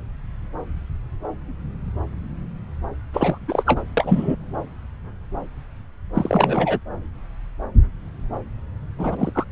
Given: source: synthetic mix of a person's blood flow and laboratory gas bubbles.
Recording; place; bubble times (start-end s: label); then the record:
Doppler ultrasound of blood flow; subclavian vein
3.13-3.38 s: bubbles
3.48-3.63 s: bubbles
3.66-3.82 s: bubbles
3.97-4.37 s: bubbles
6.13-6.79 s: bubbles
8.99-9.32 s: bubbles
9.35-9.45 s: bubbles
From the record:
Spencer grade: 2 (many but less than half of the cardiac periods contain bubble signals, singularly or in groups); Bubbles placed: anywhere in the cardiac cycle